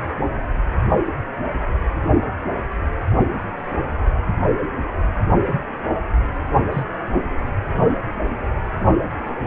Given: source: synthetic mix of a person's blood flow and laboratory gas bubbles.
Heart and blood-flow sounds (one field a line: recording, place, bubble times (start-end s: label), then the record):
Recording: Doppler ultrasound of blood flow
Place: precordium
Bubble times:
6.72-6.83 s: bubbles
From the record:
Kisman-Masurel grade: 111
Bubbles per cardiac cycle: 1 to 2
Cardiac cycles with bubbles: 1 to 10%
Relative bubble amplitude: barely perceptible (0.100 to 0.250)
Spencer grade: 1 (occasional bubble signal discernible with the cardiac motion signal, with majority of cardiac periods free of bubbles)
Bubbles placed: only in the low amplitude regions of the cardiac cycle